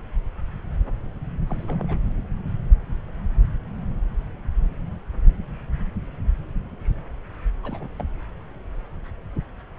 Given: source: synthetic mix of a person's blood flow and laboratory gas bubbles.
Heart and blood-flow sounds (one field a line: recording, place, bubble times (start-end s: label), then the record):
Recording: Doppler ultrasound of blood flow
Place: subclavian vein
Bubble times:
1.47-1.97 s: bubbles
7.63-7.89 s: bubbles
7.97-8.07 s: bubbles
From the record:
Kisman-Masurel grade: 221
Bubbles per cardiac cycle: several, 3 to 8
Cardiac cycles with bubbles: 10 to 50%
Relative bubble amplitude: barely perceptible (0.100 to 0.250)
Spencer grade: 2 (many but less than half of the cardiac periods contain bubble signals, singularly or in groups)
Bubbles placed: anywhere in the cardiac cycle